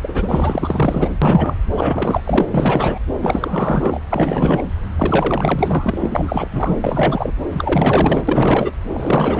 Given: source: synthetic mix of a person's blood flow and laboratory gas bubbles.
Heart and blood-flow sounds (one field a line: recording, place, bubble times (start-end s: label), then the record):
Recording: Doppler ultrasound of blood flow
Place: subclavian vein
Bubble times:
0.02-1.09 s: bubbles
1.22-1.55 s: bubbles
1.72-2.21 s: bubbles
2.24-2.98 s: bubbles
3.22-3.98 s: bubbles
4.09-4.62 s: bubbles
4.96-6.76 s: bubbles
6.81-7.33 s: bubbles
7.51-8.23 s: bubbles
8.28-8.71 s: bubbles
8.86-9.40 s: bubbles
From the record:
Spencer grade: 4 (maximum detectable bubble signal sounding continuously throughout systole and diastole of every cardiac period, and overriding the amplitude of the normal cardiac signals)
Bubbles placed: anywhere in the cardiac cycle